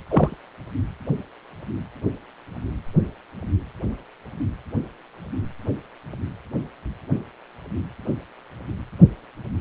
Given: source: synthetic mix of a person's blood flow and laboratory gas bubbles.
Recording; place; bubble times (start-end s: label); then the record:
Doppler ultrasound of blood flow; precordium
0.08-0.38 s: bubbles
From the record:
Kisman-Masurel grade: 123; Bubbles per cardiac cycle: 1 to 2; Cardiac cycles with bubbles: 10 to 50%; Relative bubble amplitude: loud (0.450 to 0.775); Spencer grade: 2 (many but less than half of the cardiac periods contain bubble signals, singularly or in groups); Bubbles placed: anywhere in the cardiac cycle